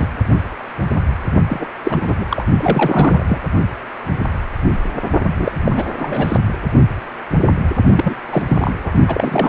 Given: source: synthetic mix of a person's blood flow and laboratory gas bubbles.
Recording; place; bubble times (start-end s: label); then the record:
Doppler ultrasound of blood flow; precordium
0.00-0.08 s: bubbles
1.48-1.67 s: bubbles
1.84-2.25 s: bubbles
2.30-2.45 s: bubbles
2.58-3.23 s: bubbles
3.28-3.40 s: bubbles
5.24-5.52 s: bubbles
5.64-5.85 s: bubbles
5.98-6.38 s: bubbles
7.96-8.15 s: bubbles
8.31-8.43 s: bubbles
8.48-8.95 s: bubbles
9.07-9.49 s: bubbles
From the record:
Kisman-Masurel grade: 332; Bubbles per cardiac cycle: rolling drumbeat, 9 or more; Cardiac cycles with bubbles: 50 to 99%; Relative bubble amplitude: moderate (0.250 to 0.450); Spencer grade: 3 (all of the cardiac periods contain showers or single bubble signals, but not dominating or overriding the cardiac motion signals); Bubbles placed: only in the low amplitude regions of the cardiac cycle